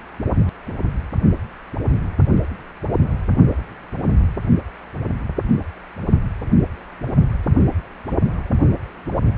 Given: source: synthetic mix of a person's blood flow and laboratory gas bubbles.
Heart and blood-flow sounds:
Doppler ultrasound of blood flow; precordium
0.64-0.74 s: bubbles
From the record:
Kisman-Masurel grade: 111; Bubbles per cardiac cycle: 1 to 2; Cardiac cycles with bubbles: 1 to 10%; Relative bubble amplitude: barely perceptible (0.100 to 0.250); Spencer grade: 1 (occasional bubble signal discernible with the cardiac motion signal, with majority of cardiac periods free of bubbles); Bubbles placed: only in the low amplitude regions of the cardiac cycle

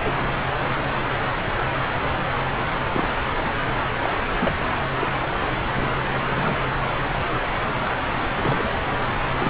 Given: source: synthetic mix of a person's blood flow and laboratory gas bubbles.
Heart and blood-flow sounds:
Doppler ultrasound of blood flow; subclavian vein
0.03-0.14 s: bubbles
0.20-0.27 s: bubbles
2.94-3.08 s: bubbles
4.01-4.10 s: bubbles
4.42-4.56 s: bubbles
4.96-5.10 s: bubbles
5.76-5.90 s: bubbles
6.32-6.55 s: bubbles
8.37-8.71 s: bubbles
9.40-9.50 s: bubbles
From the record:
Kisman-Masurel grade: 121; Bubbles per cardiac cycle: 1 to 2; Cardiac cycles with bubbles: 10 to 50%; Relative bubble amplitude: barely perceptible (0.100 to 0.250); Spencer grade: 2 (many but less than half of the cardiac periods contain bubble signals, singularly or in groups); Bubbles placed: anywhere in the cardiac cycle

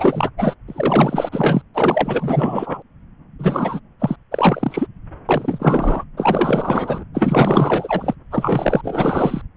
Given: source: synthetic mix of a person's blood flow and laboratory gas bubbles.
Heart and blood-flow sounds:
Doppler ultrasound of blood flow; subclavian vein
0.00-0.30 s: bubbles
0.38-0.55 s: bubbles
0.67-1.29 s: bubbles
1.31-1.62 s: bubbles
1.74-2.82 s: bubbles
3.38-3.80 s: bubbles
4.00-4.16 s: bubbles
4.31-4.87 s: bubbles
5.29-6.04 s: bubbles
6.17-7.04 s: bubbles
7.13-8.15 s: bubbles
8.31-9.42 s: bubbles
From the record:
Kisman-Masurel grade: 444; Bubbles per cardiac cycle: continuous sound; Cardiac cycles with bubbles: 100%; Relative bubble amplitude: maximal (0.775 to 0.999); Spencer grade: 4 (maximum detectable bubble signal sounding continuously throughout systole and diastole of every cardiac period, and overriding the amplitude of the normal cardiac signals); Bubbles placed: anywhere in the cardiac cycle

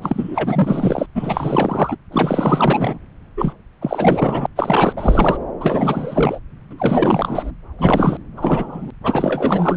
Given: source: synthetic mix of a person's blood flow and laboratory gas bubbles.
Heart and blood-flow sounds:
Doppler ultrasound of blood flow; subclavian vein
0.01-1.06 s: bubbles
1.15-1.96 s: bubbles
2.12-2.98 s: bubbles
3.37-3.53 s: bubbles
3.81-4.46 s: bubbles
4.56-4.93 s: bubbles
4.96-5.38 s: bubbles
5.60-6.40 s: bubbles
6.71-7.51 s: bubbles
7.78-8.17 s: bubbles
8.36-8.90 s: bubbles
9.03-9.77 s: bubbles
From the record:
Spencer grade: 4 (maximum detectable bubble signal sounding continuously throughout systole and diastole of every cardiac period, and overriding the amplitude of the normal cardiac signals); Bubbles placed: anywhere in the cardiac cycle

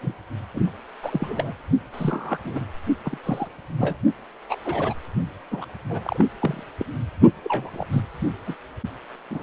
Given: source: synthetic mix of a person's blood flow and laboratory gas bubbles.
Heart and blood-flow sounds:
Doppler ultrasound of blood flow; precordium
0.01-0.14 s: bubbles
0.54-0.69 s: bubbles
1.02-1.53 s: bubbles
1.92-2.38 s: bubbles
2.44-2.65 s: bubbles
3.04-3.18 s: bubbles
3.24-3.48 s: bubbles
3.78-3.97 s: bubbles
4.49-4.55 s: bubbles
4.66-4.94 s: bubbles
5.51-5.65 s: bubbles
5.89-6.00 s: bubbles
6.03-6.25 s: bubbles
6.40-6.63 s: bubbles
6.79-6.85 s: bubbles
7.44-7.70 s: bubbles
7.73-7.86 s: bubbles
7.93-8.01 s: bubbles
8.45-8.55 s: bubbles
9.30-9.43 s: bubbles
From the record:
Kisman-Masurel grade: 242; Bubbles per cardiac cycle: several, 3 to 8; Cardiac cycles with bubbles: 100%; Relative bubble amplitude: moderate (0.250 to 0.450); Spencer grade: 3 (all of the cardiac periods contain showers or single bubble signals, but not dominating or overriding the cardiac motion signals); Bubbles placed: only in the low amplitude regions of the cardiac cycle

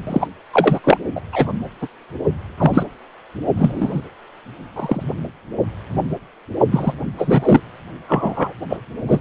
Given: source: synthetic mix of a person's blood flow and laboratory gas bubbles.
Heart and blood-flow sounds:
Doppler ultrasound of blood flow; precordium
0.07-0.28 s: bubbles
0.53-0.81 s: bubbles
0.84-0.97 s: bubbles
1.15-1.21 s: bubbles
1.32-1.52 s: bubbles
1.80-1.88 s: bubbles
2.57-2.83 s: bubbles
3.56-4.02 s: bubbles
4.76-5.03 s: bubbles
6.71-6.93 s: bubbles
7.17-7.60 s: bubbles
8.09-8.53 s: bubbles
8.70-8.77 s: bubbles
9.08-9.19 s: bubbles
From the record:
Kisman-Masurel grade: 233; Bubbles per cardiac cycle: several, 3 to 8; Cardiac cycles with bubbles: 50 to 99%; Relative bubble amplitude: loud (0.450 to 0.775); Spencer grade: 3 (all of the cardiac periods contain showers or single bubble signals, but not dominating or overriding the cardiac motion signals); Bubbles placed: only in the low amplitude regions of the cardiac cycle

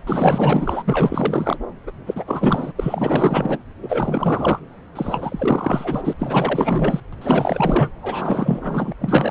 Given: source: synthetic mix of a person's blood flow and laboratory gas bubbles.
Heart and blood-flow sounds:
Doppler ultrasound of blood flow; subclavian vein
0.06-1.58 s: bubbles
1.87-1.92 s: bubbles
2.06-2.72 s: bubbles
2.75-3.58 s: bubbles
3.82-4.59 s: bubbles
4.95-6.01 s: bubbles
6.04-6.13 s: bubbles
6.17-7.00 s: bubbles
7.12-7.15 s: bubbles
7.21-7.91 s: bubbles
8.03-8.93 s: bubbles
8.99-9.31 s: bubbles
From the record:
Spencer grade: 4 (maximum detectable bubble signal sounding continuously throughout systole and diastole of every cardiac period, and overriding the amplitude of the normal cardiac signals); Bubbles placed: anywhere in the cardiac cycle

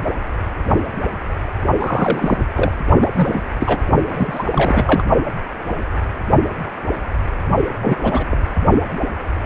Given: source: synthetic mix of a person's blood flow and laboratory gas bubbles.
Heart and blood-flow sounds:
Doppler ultrasound of blood flow; precordium
1.79-2.43 s: bubbles
2.56-2.72 s: bubbles
3.01-3.08 s: bubbles
3.15-3.43 s: bubbles
3.60-3.81 s: bubbles
4.08-4.44 s: bubbles
4.52-5.03 s: bubbles
7.79-8.26 s: bubbles
8.30-8.38 s: bubbles
From the record:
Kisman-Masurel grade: 332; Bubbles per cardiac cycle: rolling drumbeat, 9 or more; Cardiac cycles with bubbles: 50 to 99%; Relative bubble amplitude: moderate (0.250 to 0.450); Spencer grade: 3 (all of the cardiac periods contain showers or single bubble signals, but not dominating or overriding the cardiac motion signals); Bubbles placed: only in the low amplitude regions of the cardiac cycle

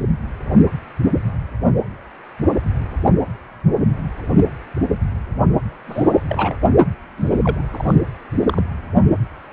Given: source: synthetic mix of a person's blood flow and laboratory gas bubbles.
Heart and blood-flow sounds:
Doppler ultrasound of blood flow; precordium
5.87-6.21 s: bubbles
6.29-6.58 s: bubbles
7.17-7.62 s: bubbles
7.72-7.94 s: bubbles
8.41-8.62 s: bubbles
From the record:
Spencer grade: 2 (many but less than half of the cardiac periods contain bubble signals, singularly or in groups); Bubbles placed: only in the low amplitude regions of the cardiac cycle

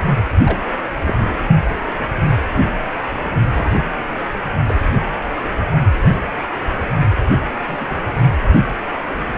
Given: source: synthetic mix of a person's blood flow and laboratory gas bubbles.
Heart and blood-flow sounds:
Doppler ultrasound of blood flow; precordium
0.45-0.58 s: bubbles
1.00-1.16 s: bubbles
3.54-3.75 s: bubbles
4.67-4.76 s: bubbles
7.66-7.95 s: bubbles
From the record:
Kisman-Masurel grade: 122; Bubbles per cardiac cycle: 1 to 2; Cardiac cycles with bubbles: 10 to 50%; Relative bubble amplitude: moderate (0.250 to 0.450); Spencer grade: 2 (many but less than half of the cardiac periods contain bubble signals, singularly or in groups); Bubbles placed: anywhere in the cardiac cycle

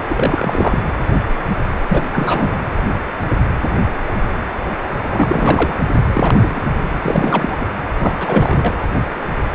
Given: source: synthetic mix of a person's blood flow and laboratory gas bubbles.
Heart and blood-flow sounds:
Doppler ultrasound of blood flow; precordium
0.09-0.82 s: bubbles
1.88-2.02 s: bubbles
2.12-2.59 s: bubbles
5.10-5.73 s: bubbles
6.13-6.60 s: bubbles
6.94-6.97 s: bubbles
7.02-7.66 s: bubbles
7.98-8.14 s: bubbles
8.19-8.75 s: bubbles
From the record:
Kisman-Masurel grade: 332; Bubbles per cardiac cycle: rolling drumbeat, 9 or more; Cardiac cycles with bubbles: 50 to 99%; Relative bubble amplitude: moderate (0.250 to 0.450); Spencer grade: 3 (all of the cardiac periods contain showers or single bubble signals, but not dominating or overriding the cardiac motion signals); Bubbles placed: anywhere in the cardiac cycle

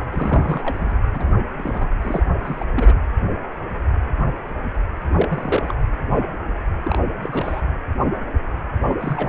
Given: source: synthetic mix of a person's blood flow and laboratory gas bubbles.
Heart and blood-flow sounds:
Doppler ultrasound of blood flow; precordium
0.11-0.98 s: bubbles
1.12-1.33 s: bubbles
1.57-1.86 s: bubbles
2.01-2.23 s: bubbles
2.44-2.65 s: bubbles
2.75-2.94 s: bubbles
5.18-5.74 s: bubbles
6.83-7.02 s: bubbles
7.20-7.62 s: bubbles
8.88-9.29 s: bubbles
From the record:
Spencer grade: 2 (many but less than half of the cardiac periods contain bubble signals, singularly or in groups); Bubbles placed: anywhere in the cardiac cycle

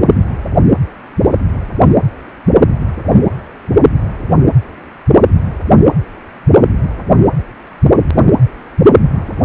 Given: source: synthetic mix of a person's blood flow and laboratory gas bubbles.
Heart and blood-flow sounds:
Doppler ultrasound of blood flow; precordium
no bubbles
From the record:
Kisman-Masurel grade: 000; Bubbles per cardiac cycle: 0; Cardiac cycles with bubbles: 0%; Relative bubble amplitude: no bubbles discernible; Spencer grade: 0 (complete lack of bubble signals)

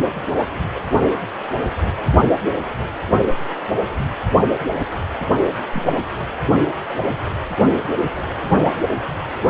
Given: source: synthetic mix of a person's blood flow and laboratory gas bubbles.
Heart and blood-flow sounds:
Doppler ultrasound of blood flow; precordium
5.74-5.85 s: bubbles
From the record:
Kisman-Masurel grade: 111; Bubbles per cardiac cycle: 1 to 2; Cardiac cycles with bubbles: 1 to 10%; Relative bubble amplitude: barely perceptible (0.100 to 0.250); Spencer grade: 1 (occasional bubble signal discernible with the cardiac motion signal, with majority of cardiac periods free of bubbles); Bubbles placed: only in the low amplitude regions of the cardiac cycle

